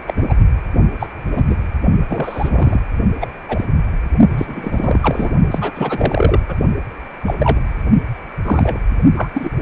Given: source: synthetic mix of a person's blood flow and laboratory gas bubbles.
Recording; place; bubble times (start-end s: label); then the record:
Doppler ultrasound of blood flow; precordium
0.07-0.14 s: bubbles
0.17-0.34 s: bubbles
0.99-1.08 s: bubbles
1.24-1.43 s: bubbles
1.49-1.57 s: bubbles
2.10-2.81 s: bubbles
3.20-3.27 s: bubbles
3.48-3.65 s: bubbles
4.30-5.30 s: bubbles
5.50-5.72 s: bubbles
5.75-6.40 s: bubbles
6.47-6.55 s: bubbles
7.25-7.34 s: bubbles
7.39-7.60 s: bubbles
8.43-8.79 s: bubbles
9.17-9.31 s: bubbles
9.34-9.49 s: bubbles
From the record:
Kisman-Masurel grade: 243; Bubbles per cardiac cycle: several, 3 to 8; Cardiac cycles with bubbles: 100%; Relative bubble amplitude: loud (0.450 to 0.775); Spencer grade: 3 (all of the cardiac periods contain showers or single bubble signals, but not dominating or overriding the cardiac motion signals); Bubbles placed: only in the low amplitude regions of the cardiac cycle